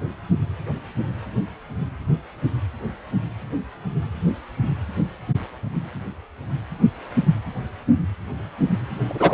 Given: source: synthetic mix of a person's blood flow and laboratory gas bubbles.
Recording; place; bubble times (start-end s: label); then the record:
Doppler ultrasound of blood flow; precordium
9.08-9.34 s: bubbles
From the record:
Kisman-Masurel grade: 113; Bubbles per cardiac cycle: 1 to 2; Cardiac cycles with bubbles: 1 to 10%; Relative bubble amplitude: loud (0.450 to 0.775); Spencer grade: 1 (occasional bubble signal discernible with the cardiac motion signal, with majority of cardiac periods free of bubbles); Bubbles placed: anywhere in the cardiac cycle